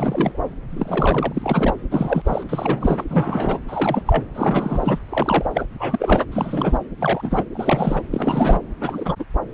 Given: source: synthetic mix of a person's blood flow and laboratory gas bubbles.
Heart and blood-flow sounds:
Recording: Doppler ultrasound of blood flow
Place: subclavian vein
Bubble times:
0.00-0.40 s: bubbles
0.70-1.73 s: bubbles
1.91-2.44 s: bubbles
2.49-3.04 s: bubbles
3.08-3.60 s: bubbles
3.68-4.02 s: bubbles
4.06-4.25 s: bubbles
4.34-4.99 s: bubbles
5.09-5.66 s: bubbles
5.79-6.25 s: bubbles
6.31-6.78 s: bubbles
7.00-7.46 s: bubbles
7.52-8.02 s: bubbles
8.12-8.61 s: bubbles
8.80-9.15 s: bubbles
9.19-9.25 s: bubbles
From the record:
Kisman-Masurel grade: 342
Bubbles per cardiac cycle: rolling drumbeat, 9 or more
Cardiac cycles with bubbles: 100%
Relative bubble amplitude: moderate (0.250 to 0.450)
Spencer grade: 3 (all of the cardiac periods contain showers or single bubble signals, but not dominating or overriding the cardiac motion signals)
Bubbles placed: anywhere in the cardiac cycle

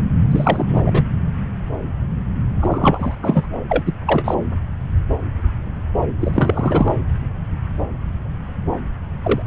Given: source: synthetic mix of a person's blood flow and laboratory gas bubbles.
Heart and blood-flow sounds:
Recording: Doppler ultrasound of blood flow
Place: subclavian vein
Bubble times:
0.30-1.03 s: bubbles
2.60-3.15 s: bubbles
3.22-3.47 s: bubbles
3.69-3.94 s: bubbles
4.05-4.34 s: bubbles
6.20-6.93 s: bubbles
9.22-9.42 s: bubbles
From the record:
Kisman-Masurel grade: 223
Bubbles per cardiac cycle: several, 3 to 8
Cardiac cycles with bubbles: 10 to 50%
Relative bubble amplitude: loud (0.450 to 0.775)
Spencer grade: 2 (many but less than half of the cardiac periods contain bubble signals, singularly or in groups)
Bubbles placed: anywhere in the cardiac cycle

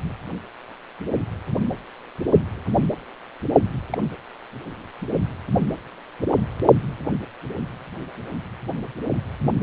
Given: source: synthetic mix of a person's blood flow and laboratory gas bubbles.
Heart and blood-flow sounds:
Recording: Doppler ultrasound of blood flow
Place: precordium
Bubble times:
3.91-3.99 s: bubbles
From the record:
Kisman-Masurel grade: 111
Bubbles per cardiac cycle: 1 to 2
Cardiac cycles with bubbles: 1 to 10%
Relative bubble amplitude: barely perceptible (0.100 to 0.250)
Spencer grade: 1 (occasional bubble signal discernible with the cardiac motion signal, with majority of cardiac periods free of bubbles)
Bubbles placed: only in the low amplitude regions of the cardiac cycle

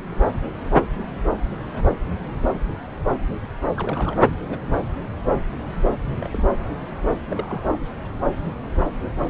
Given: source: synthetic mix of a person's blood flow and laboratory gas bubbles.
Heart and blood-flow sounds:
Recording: Doppler ultrasound of blood flow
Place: subclavian vein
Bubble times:
3.74-4.22 s: bubbles
4.46-4.58 s: bubbles
4.66-4.91 s: bubbles
6.13-6.17 s: bubbles
6.20-6.29 s: bubbles
6.32-6.43 s: bubbles
7.28-7.65 s: bubbles
7.72-7.79 s: bubbles
From the record:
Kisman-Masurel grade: 221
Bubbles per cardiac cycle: several, 3 to 8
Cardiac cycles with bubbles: 10 to 50%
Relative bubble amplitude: barely perceptible (0.100 to 0.250)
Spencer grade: 2 (many but less than half of the cardiac periods contain bubble signals, singularly or in groups)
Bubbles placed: anywhere in the cardiac cycle

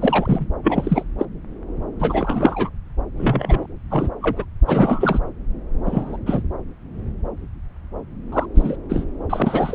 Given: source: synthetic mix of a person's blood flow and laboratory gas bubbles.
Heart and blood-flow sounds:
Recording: Doppler ultrasound of blood flow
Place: subclavian vein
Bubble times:
0.00-0.46 s: bubbles
0.63-1.04 s: bubbles
1.18-1.25 s: bubbles
1.99-2.70 s: bubbles
3.18-3.67 s: bubbles
3.90-4.09 s: bubbles
4.21-4.45 s: bubbles
4.66-5.19 s: bubbles
5.85-6.17 s: bubbles
6.26-6.42 s: bubbles
8.32-8.46 s: bubbles
8.55-8.77 s: bubbles
8.90-9.05 s: bubbles
9.29-9.75 s: bubbles
From the record:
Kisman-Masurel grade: 233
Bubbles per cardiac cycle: several, 3 to 8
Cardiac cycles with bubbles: 50 to 99%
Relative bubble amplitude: loud (0.450 to 0.775)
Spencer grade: 3 (all of the cardiac periods contain showers or single bubble signals, but not dominating or overriding the cardiac motion signals)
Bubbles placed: anywhere in the cardiac cycle

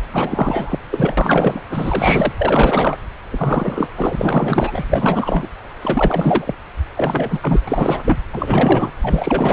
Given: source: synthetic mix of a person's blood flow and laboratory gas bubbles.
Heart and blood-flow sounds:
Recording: Doppler ultrasound of blood flow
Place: subclavian vein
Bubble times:
0.12-0.79 s: bubbles
0.91-1.62 s: bubbles
1.70-2.32 s: bubbles
2.38-2.98 s: bubbles
3.29-3.88 s: bubbles
3.96-4.85 s: bubbles
4.90-5.49 s: bubbles
5.82-6.55 s: bubbles
6.97-7.60 s: bubbles
7.67-8.20 s: bubbles
8.33-8.92 s: bubbles
9.02-9.53 s: bubbles
From the record:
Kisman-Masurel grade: 444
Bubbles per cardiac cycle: continuous sound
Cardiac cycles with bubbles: 100%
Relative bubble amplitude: maximal (0.775 to 0.999)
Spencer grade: 4 (maximum detectable bubble signal sounding continuously throughout systole and diastole of every cardiac period, and overriding the amplitude of the normal cardiac signals)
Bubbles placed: anywhere in the cardiac cycle

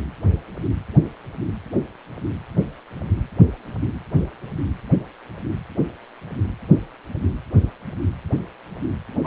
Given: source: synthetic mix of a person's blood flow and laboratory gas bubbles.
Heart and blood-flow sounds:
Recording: Doppler ultrasound of blood flow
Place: precordium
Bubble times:
9.23-9.26 s: bubbles
From the record:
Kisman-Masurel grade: 112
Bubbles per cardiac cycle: 1 to 2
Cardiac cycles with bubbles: 1 to 10%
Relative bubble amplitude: moderate (0.250 to 0.450)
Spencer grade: 1 (occasional bubble signal discernible with the cardiac motion signal, with majority of cardiac periods free of bubbles)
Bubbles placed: anywhere in the cardiac cycle

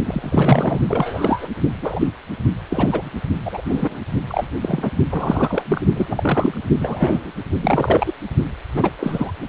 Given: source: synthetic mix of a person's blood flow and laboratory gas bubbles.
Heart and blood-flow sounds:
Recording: Doppler ultrasound of blood flow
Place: precordium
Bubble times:
0.05-0.80 s: bubbles
0.89-1.48 s: bubbles
1.81-2.08 s: bubbles
2.69-3.11 s: bubbles
3.45-3.99 s: bubbles
4.28-4.47 s: bubbles
4.60-4.91 s: bubbles
5.09-5.88 s: bubbles
5.96-6.61 s: bubbles
6.79-7.32 s: bubbles
7.62-8.13 s: bubbles
8.76-8.91 s: bubbles
8.99-9.32 s: bubbles
From the record:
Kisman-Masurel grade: 243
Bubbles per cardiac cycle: several, 3 to 8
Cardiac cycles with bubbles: 100%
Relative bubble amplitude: loud (0.450 to 0.775)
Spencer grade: 3 (all of the cardiac periods contain showers or single bubble signals, but not dominating or overriding the cardiac motion signals)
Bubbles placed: only in the low amplitude regions of the cardiac cycle

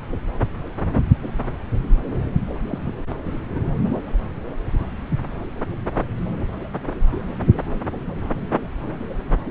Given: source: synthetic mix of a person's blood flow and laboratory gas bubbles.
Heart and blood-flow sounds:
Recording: Doppler ultrasound of blood flow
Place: subclavian vein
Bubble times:
2.69-2.92 s: bubbles
3.55-3.60 s: bubbles
From the record:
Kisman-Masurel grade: 111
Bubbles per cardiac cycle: 1 to 2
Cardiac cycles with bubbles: 1 to 10%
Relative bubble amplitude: barely perceptible (0.100 to 0.250)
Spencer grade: 1 (occasional bubble signal discernible with the cardiac motion signal, with majority of cardiac periods free of bubbles)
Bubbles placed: anywhere in the cardiac cycle

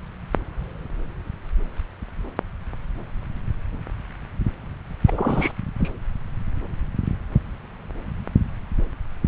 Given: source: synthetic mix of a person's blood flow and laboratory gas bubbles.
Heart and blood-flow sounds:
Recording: Doppler ultrasound of blood flow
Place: subclavian vein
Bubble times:
5.06-5.52 s: bubbles
5.80-5.91 s: bubbles
From the record:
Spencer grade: 2 (many but less than half of the cardiac periods contain bubble signals, singularly or in groups)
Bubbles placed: anywhere in the cardiac cycle

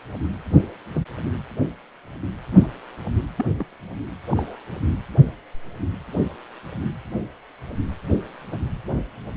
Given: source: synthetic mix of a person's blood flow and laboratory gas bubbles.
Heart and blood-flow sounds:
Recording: Doppler ultrasound of blood flow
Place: precordium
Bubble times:
0.94-1.04 s: bubbles
2.51-2.67 s: bubbles
3.36-3.46 s: bubbles
3.58-3.65 s: bubbles
4.31-4.58 s: bubbles
From the record:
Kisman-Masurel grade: 121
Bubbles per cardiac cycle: 1 to 2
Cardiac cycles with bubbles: 10 to 50%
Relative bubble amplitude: barely perceptible (0.100 to 0.250)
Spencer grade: 2 (many but less than half of the cardiac periods contain bubble signals, singularly or in groups)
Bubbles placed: anywhere in the cardiac cycle

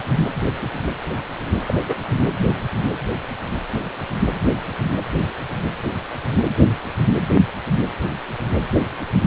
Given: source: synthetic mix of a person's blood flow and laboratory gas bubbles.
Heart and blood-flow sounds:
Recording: Doppler ultrasound of blood flow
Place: precordium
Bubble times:
1.64-1.74 s: bubbles
1.88-1.96 s: bubbles
From the record:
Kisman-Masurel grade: 112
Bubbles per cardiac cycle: 1 to 2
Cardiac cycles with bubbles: 1 to 10%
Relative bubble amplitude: moderate (0.250 to 0.450)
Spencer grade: 1 (occasional bubble signal discernible with the cardiac motion signal, with majority of cardiac periods free of bubbles)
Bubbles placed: anywhere in the cardiac cycle

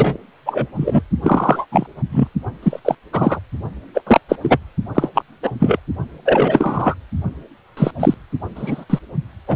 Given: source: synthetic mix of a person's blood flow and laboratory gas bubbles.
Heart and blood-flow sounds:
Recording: Doppler ultrasound of blood flow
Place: precordium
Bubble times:
0.00-0.17 s: bubbles
0.45-0.66 s: bubbles
0.75-1.01 s: bubbles
1.22-1.65 s: bubbles
1.72-1.86 s: bubbles
2.11-2.28 s: bubbles
2.62-2.80 s: bubbles
2.85-2.95 s: bubbles
3.13-3.40 s: bubbles
3.94-4.01 s: bubbles
4.06-4.20 s: bubbles
4.29-4.35 s: bubbles
4.42-4.58 s: bubbles
4.94-5.09 s: bubbles
5.14-5.22 s: bubbles
5.42-5.52 s: bubbles
5.59-5.79 s: bubbles
6.25-6.94 s: bubbles
7.77-7.91 s: bubbles
8.00-8.14 s: bubbles
8.56-8.85 s: bubbles
8.90-8.99 s: bubbles
9.48-9.56 s: bubbles
From the record:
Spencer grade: 3 (all of the cardiac periods contain showers or single bubble signals, but not dominating or overriding the cardiac motion signals)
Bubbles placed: only in the low amplitude regions of the cardiac cycle

